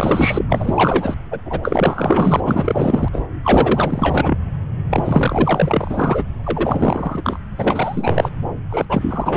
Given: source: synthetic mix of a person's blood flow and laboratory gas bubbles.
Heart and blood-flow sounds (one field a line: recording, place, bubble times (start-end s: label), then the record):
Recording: Doppler ultrasound of blood flow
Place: subclavian vein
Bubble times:
0.00-0.46 s: bubbles
0.49-1.16 s: bubbles
1.31-1.41 s: bubbles
1.46-2.41 s: bubbles
2.44-3.08 s: bubbles
3.12-3.25 s: bubbles
3.44-4.38 s: bubbles
4.90-6.23 s: bubbles
6.43-7.38 s: bubbles
7.58-8.30 s: bubbles
8.70-8.85 s: bubbles
8.89-9.37 s: bubbles
From the record:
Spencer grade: 4 (maximum detectable bubble signal sounding continuously throughout systole and diastole of every cardiac period, and overriding the amplitude of the normal cardiac signals)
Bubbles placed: anywhere in the cardiac cycle